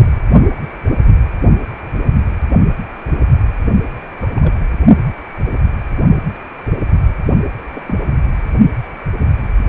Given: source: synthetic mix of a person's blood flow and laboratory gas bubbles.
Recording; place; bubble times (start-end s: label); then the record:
Doppler ultrasound of blood flow; precordium
4.21-4.29 s: bubbles
4.34-4.55 s: bubbles
7.74-7.83 s: bubbles
7.87-7.95 s: bubbles
9.21-9.28 s: bubbles
From the record:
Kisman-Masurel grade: 121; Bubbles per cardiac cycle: 1 to 2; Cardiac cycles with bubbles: 10 to 50%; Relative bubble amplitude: barely perceptible (0.100 to 0.250); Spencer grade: 2 (many but less than half of the cardiac periods contain bubble signals, singularly or in groups); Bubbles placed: only in the low amplitude regions of the cardiac cycle